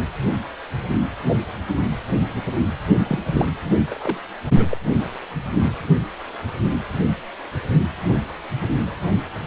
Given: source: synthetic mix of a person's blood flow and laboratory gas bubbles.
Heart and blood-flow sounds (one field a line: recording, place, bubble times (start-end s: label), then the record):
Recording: Doppler ultrasound of blood flow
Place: precordium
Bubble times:
3.04-3.19 s: bubbles
3.30-3.48 s: bubbles
3.90-4.18 s: bubbles
4.54-4.78 s: bubbles
From the record:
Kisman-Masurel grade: 211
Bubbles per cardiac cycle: several, 3 to 8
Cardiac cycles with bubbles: 1 to 10%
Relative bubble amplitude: barely perceptible (0.100 to 0.250)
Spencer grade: 1 (occasional bubble signal discernible with the cardiac motion signal, with majority of cardiac periods free of bubbles)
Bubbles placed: anywhere in the cardiac cycle